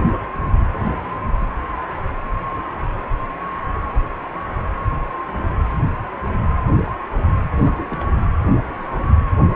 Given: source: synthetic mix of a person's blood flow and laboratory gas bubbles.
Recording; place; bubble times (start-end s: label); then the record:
Doppler ultrasound of blood flow; precordium
7.51-8.09 s: bubbles
8.14-8.25 s: bubbles
From the record:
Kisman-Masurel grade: 211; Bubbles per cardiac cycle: several, 3 to 8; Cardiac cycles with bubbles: 1 to 10%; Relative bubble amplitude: barely perceptible (0.100 to 0.250); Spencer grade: 1 (occasional bubble signal discernible with the cardiac motion signal, with majority of cardiac periods free of bubbles); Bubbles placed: anywhere in the cardiac cycle